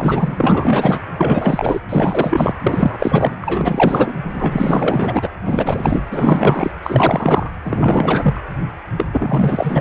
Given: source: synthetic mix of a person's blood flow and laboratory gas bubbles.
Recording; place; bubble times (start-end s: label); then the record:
Doppler ultrasound of blood flow; precordium
0.00-1.07 s: bubbles
1.17-1.79 s: bubbles
1.89-2.53 s: bubbles
2.62-3.37 s: bubbles
3.44-4.13 s: bubbles
4.34-5.27 s: bubbles
5.46-6.03 s: bubbles
6.11-6.71 s: bubbles
6.83-7.51 s: bubbles
7.64-8.38 s: bubbles
8.97-9.06 s: bubbles
9.12-9.81 s: bubbles
From the record:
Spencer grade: 4 (maximum detectable bubble signal sounding continuously throughout systole and diastole of every cardiac period, and overriding the amplitude of the normal cardiac signals); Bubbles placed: anywhere in the cardiac cycle